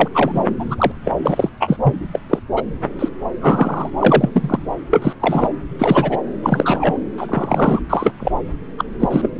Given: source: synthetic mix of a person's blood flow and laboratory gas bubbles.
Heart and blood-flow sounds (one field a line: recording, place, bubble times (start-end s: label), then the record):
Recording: Doppler ultrasound of blood flow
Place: subclavian vein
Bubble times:
0.00-0.08 s: bubbles
0.14-0.32 s: bubbles
0.35-0.41 s: bubbles
0.58-0.75 s: bubbles
0.78-0.92 s: bubbles
1.05-1.12 s: bubbles
1.23-1.49 s: bubbles
1.60-1.76 s: bubbles
1.83-1.94 s: bubbles
2.12-2.19 s: bubbles
2.29-2.39 s: bubbles
2.56-2.63 s: bubbles
2.98-3.08 s: bubbles
3.41-3.90 s: bubbles
4.01-4.59 s: bubbles
4.91-5.13 s: bubbles
5.20-5.49 s: bubbles
5.79-6.19 s: bubbles
6.43-7.00 s: bubbles
7.18-7.81 s: bubbles
7.90-8.12 s: bubbles
8.20-8.31 s: bubbles
8.78-8.85 s: bubbles
8.99-9.08 s: bubbles
9.10-9.29 s: bubbles
From the record:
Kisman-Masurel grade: 243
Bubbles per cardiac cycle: several, 3 to 8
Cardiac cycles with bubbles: 100%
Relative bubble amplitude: loud (0.450 to 0.775)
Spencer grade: 3 (all of the cardiac periods contain showers or single bubble signals, but not dominating or overriding the cardiac motion signals)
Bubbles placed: anywhere in the cardiac cycle